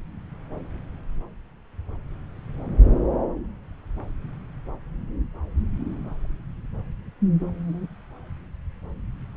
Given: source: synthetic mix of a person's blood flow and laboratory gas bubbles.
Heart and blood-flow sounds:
Doppler ultrasound of blood flow; subclavian vein
no bubbles
From the record:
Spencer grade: 0 (complete lack of bubble signals)

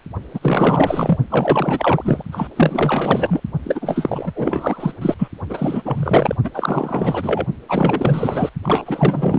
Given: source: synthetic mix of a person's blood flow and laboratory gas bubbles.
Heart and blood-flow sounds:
Doppler ultrasound of blood flow; precordium
0.33-1.18 s: bubbles
1.29-2.23 s: bubbles
2.31-2.48 s: bubbles
2.56-3.42 s: bubbles
3.64-4.32 s: bubbles
4.35-4.93 s: bubbles
5.01-5.14 s: bubbles
5.18-5.28 s: bubbles
5.49-5.82 s: bubbles
5.85-6.37 s: bubbles
6.43-6.49 s: bubbles
6.53-7.45 s: bubbles
7.67-8.49 s: bubbles
8.63-9.39 s: bubbles
From the record:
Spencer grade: 4 (maximum detectable bubble signal sounding continuously throughout systole and diastole of every cardiac period, and overriding the amplitude of the normal cardiac signals); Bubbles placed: only in the low amplitude regions of the cardiac cycle

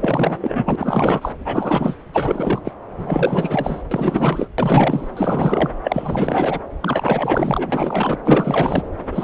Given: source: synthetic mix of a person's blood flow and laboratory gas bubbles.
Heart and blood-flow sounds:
Doppler ultrasound of blood flow; subclavian vein
0.00-1.32 s: bubbles
1.45-1.96 s: bubbles
2.12-2.73 s: bubbles
2.98-3.82 s: bubbles
3.91-4.48 s: bubbles
4.58-5.09 s: bubbles
5.16-5.71 s: bubbles
5.83-6.59 s: bubbles
6.80-8.20 s: bubbles
8.24-8.83 s: bubbles
9.12-9.24 s: bubbles
From the record:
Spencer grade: 4 (maximum detectable bubble signal sounding continuously throughout systole and diastole of every cardiac period, and overriding the amplitude of the normal cardiac signals); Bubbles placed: anywhere in the cardiac cycle

